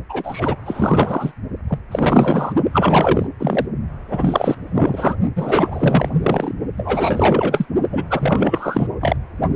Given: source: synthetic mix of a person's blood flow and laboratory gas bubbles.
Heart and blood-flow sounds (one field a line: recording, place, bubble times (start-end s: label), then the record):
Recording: Doppler ultrasound of blood flow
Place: precordium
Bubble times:
0.09-0.55 s: bubbles
0.65-1.32 s: bubbles
1.68-1.79 s: bubbles
1.91-2.52 s: bubbles
2.73-3.27 s: bubbles
3.39-3.67 s: bubbles
4.10-4.57 s: bubbles
4.75-5.15 s: bubbles
5.35-6.10 s: bubbles
6.22-6.52 s: bubbles
6.78-7.66 s: bubbles
7.92-8.04 s: bubbles
8.10-8.87 s: bubbles
9.00-9.16 s: bubbles
From the record:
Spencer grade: 4 (maximum detectable bubble signal sounding continuously throughout systole and diastole of every cardiac period, and overriding the amplitude of the normal cardiac signals)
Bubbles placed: only in the low amplitude regions of the cardiac cycle